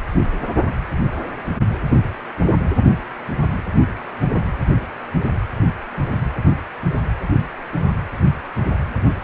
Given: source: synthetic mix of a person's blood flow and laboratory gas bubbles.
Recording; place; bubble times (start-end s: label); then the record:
Doppler ultrasound of blood flow; precordium
no bubbles
From the record:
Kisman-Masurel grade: 000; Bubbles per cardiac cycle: 0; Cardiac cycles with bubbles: 0%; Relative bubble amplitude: no bubbles discernible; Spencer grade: 0 (complete lack of bubble signals)